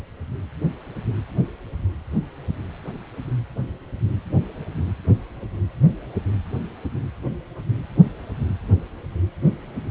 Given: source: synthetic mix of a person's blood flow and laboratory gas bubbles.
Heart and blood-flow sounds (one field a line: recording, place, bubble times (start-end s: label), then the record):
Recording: Doppler ultrasound of blood flow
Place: precordium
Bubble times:
no bubbles
From the record:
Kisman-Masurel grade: 000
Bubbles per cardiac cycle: 0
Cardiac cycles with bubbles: 0%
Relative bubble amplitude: no bubbles discernible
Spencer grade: 0 (complete lack of bubble signals)